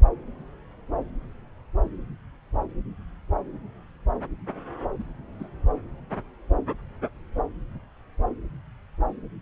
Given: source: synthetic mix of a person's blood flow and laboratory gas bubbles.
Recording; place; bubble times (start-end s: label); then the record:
Doppler ultrasound of blood flow; subclavian vein
4.99-5.04 s: bubbles
5.40-5.47 s: bubbles
From the record:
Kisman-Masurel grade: 111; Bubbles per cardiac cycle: 1 to 2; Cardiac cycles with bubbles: 1 to 10%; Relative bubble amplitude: barely perceptible (0.100 to 0.250); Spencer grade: 1 (occasional bubble signal discernible with the cardiac motion signal, with majority of cardiac periods free of bubbles); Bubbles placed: anywhere in the cardiac cycle